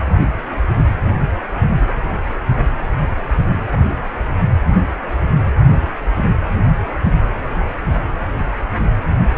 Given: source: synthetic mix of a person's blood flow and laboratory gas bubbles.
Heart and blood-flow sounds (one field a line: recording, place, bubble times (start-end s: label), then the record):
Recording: Doppler ultrasound of blood flow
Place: precordium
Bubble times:
no bubbles
From the record:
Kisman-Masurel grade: 000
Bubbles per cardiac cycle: 0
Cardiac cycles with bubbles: 0%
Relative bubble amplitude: no bubbles discernible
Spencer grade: 0 (complete lack of bubble signals)